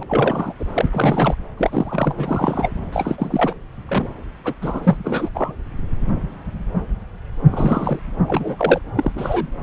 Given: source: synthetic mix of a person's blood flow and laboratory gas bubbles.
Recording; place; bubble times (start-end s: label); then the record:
Doppler ultrasound of blood flow; subclavian vein
0.00-0.03 s: bubbles
0.07-0.54 s: bubbles
0.59-0.65 s: bubbles
0.73-1.34 s: bubbles
1.57-2.13 s: bubbles
2.17-2.74 s: bubbles
2.92-3.55 s: bubbles
3.88-4.08 s: bubbles
4.44-4.54 s: bubbles
4.62-4.97 s: bubbles
5.04-5.29 s: bubbles
5.35-5.53 s: bubbles
7.51-7.99 s: bubbles
8.28-8.81 s: bubbles
8.96-9.12 s: bubbles
9.15-9.47 s: bubbles
From the record:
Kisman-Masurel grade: 232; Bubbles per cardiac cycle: several, 3 to 8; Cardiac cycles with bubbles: 50 to 99%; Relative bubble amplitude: moderate (0.250 to 0.450); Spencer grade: 3 (all of the cardiac periods contain showers or single bubble signals, but not dominating or overriding the cardiac motion signals); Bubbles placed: anywhere in the cardiac cycle